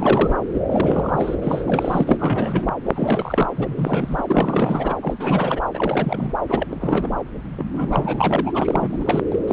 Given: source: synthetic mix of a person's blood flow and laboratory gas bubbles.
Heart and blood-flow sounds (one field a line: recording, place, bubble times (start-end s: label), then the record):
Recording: Doppler ultrasound of blood flow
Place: subclavian vein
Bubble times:
0.00-0.35 s: bubbles
0.54-0.59 s: bubbles
0.66-1.35 s: bubbles
1.42-2.04 s: bubbles
2.06-2.70 s: bubbles
2.85-3.50 s: bubbles
3.57-4.22 s: bubbles
4.29-4.95 s: bubbles
5.03-5.13 s: bubbles
5.20-5.63 s: bubbles
5.73-6.33 s: bubbles
6.49-6.67 s: bubbles
6.71-7.12 s: bubbles
7.57-7.65 s: bubbles
7.74-8.51 s: bubbles
8.53-9.28 s: bubbles
9.31-9.39 s: bubbles
9.47-9.53 s: bubbles
From the record:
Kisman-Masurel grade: 332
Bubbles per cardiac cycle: rolling drumbeat, 9 or more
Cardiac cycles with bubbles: 50 to 99%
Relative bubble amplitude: moderate (0.250 to 0.450)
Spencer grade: 3 (all of the cardiac periods contain showers or single bubble signals, but not dominating or overriding the cardiac motion signals)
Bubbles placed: anywhere in the cardiac cycle